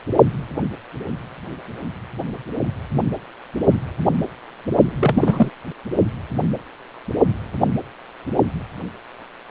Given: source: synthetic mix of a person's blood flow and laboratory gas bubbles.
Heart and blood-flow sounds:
Doppler ultrasound of blood flow; precordium
4.84-5.50 s: bubbles
From the record:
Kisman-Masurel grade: 223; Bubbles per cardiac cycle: several, 3 to 8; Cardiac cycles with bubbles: 10 to 50%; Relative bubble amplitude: loud (0.450 to 0.775); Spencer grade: 2 (many but less than half of the cardiac periods contain bubble signals, singularly or in groups); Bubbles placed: only in the low amplitude regions of the cardiac cycle

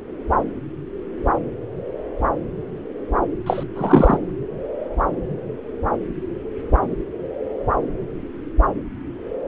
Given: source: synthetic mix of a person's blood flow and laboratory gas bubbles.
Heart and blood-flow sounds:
Doppler ultrasound of blood flow; subclavian vein
3.46-3.64 s: bubbles
3.76-4.18 s: bubbles
From the record:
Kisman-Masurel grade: 223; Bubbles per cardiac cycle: several, 3 to 8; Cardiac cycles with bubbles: 10 to 50%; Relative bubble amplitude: loud (0.450 to 0.775); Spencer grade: 2 (many but less than half of the cardiac periods contain bubble signals, singularly or in groups); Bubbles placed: anywhere in the cardiac cycle

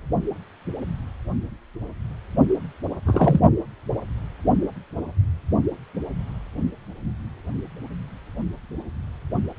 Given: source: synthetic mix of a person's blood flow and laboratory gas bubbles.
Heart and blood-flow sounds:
Doppler ultrasound of blood flow; precordium
3.06-3.40 s: bubbles
From the record:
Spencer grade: 1 (occasional bubble signal discernible with the cardiac motion signal, with majority of cardiac periods free of bubbles); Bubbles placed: only in the low amplitude regions of the cardiac cycle

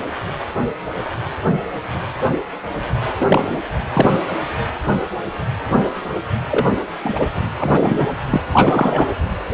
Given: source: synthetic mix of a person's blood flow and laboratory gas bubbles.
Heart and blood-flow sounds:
Doppler ultrasound of blood flow; precordium
3.20-3.58 s: bubbles
3.94-4.13 s: bubbles
6.47-6.76 s: bubbles
7.04-7.26 s: bubbles
7.59-8.07 s: bubbles
8.30-8.41 s: bubbles
8.53-9.08 s: bubbles
From the record:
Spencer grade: 2 (many but less than half of the cardiac periods contain bubble signals, singularly or in groups); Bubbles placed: anywhere in the cardiac cycle

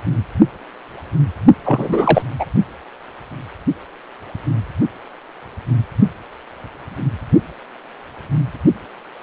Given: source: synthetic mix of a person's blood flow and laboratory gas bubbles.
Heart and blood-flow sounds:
Doppler ultrasound of blood flow; precordium
1.65-2.22 s: bubbles
2.39-2.45 s: bubbles
From the record:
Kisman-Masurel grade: 223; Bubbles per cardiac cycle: several, 3 to 8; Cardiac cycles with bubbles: 10 to 50%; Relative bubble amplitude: loud (0.450 to 0.775); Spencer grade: 2 (many but less than half of the cardiac periods contain bubble signals, singularly or in groups); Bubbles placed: only in the low amplitude regions of the cardiac cycle

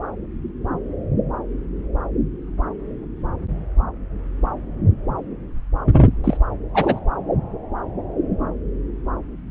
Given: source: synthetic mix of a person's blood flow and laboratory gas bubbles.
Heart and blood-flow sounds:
Doppler ultrasound of blood flow; subclavian vein
6.24-6.37 s: bubbles
6.74-7.00 s: bubbles
From the record:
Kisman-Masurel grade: 113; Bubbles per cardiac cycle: 1 to 2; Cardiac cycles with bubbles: 1 to 10%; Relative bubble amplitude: loud (0.450 to 0.775); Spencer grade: 1 (occasional bubble signal discernible with the cardiac motion signal, with majority of cardiac periods free of bubbles); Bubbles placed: anywhere in the cardiac cycle

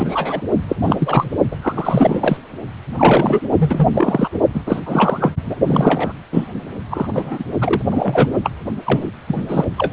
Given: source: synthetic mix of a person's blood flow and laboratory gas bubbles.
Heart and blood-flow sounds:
Doppler ultrasound of blood flow; precordium
0.00-0.41 s: bubbles
0.68-0.76 s: bubbles
0.81-0.96 s: bubbles
0.98-1.30 s: bubbles
1.50-1.56 s: bubbles
1.61-2.37 s: bubbles
2.98-3.40 s: bubbles
3.58-3.88 s: bubbles
3.90-4.29 s: bubbles
4.54-4.62 s: bubbles
4.66-4.80 s: bubbles
4.86-5.34 s: bubbles
5.45-5.55 s: bubbles
5.66-6.12 s: bubbles
6.32-6.47 s: bubbles
6.91-7.44 s: bubbles
7.61-7.82 s: bubbles
7.91-8.37 s: bubbles
8.43-8.51 s: bubbles
8.85-9.10 s: bubbles
9.27-9.42 s: bubbles
9.48-9.64 s: bubbles
9.77-9.93 s: bubbles
From the record:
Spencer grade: 3 (all of the cardiac periods contain showers or single bubble signals, but not dominating or overriding the cardiac motion signals); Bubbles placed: only in the low amplitude regions of the cardiac cycle

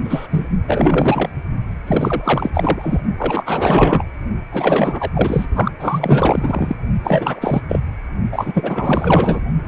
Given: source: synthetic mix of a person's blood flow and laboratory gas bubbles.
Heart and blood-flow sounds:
Doppler ultrasound of blood flow; precordium
0.04-0.27 s: bubbles
0.30-0.49 s: bubbles
0.67-1.30 s: bubbles
1.86-2.50 s: bubbles
2.53-3.01 s: bubbles
3.17-4.04 s: bubbles
4.52-5.11 s: bubbles
5.13-5.46 s: bubbles
5.55-5.71 s: bubbles
5.80-6.75 s: bubbles
7.03-7.62 s: bubbles
7.68-7.80 s: bubbles
8.32-9.41 s: bubbles
9.65-9.68 s: bubbles
From the record:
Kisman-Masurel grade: 444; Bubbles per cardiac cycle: continuous sound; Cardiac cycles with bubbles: 100%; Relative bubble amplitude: maximal (0.775 to 0.999); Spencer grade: 4 (maximum detectable bubble signal sounding continuously throughout systole and diastole of every cardiac period, and overriding the amplitude of the normal cardiac signals); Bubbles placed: only in the low amplitude regions of the cardiac cycle

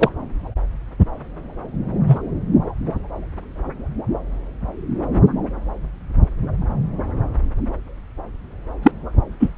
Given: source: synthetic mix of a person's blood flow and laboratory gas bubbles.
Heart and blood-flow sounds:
Doppler ultrasound of blood flow; subclavian vein
0.00-0.09 s: bubbles
2.07-2.18 s: bubbles
8.83-8.91 s: bubbles
9.40-9.51 s: bubbles
From the record:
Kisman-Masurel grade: 123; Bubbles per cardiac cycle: 1 to 2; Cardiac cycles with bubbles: 10 to 50%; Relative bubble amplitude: loud (0.450 to 0.775); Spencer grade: 2 (many but less than half of the cardiac periods contain bubble signals, singularly or in groups); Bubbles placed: anywhere in the cardiac cycle

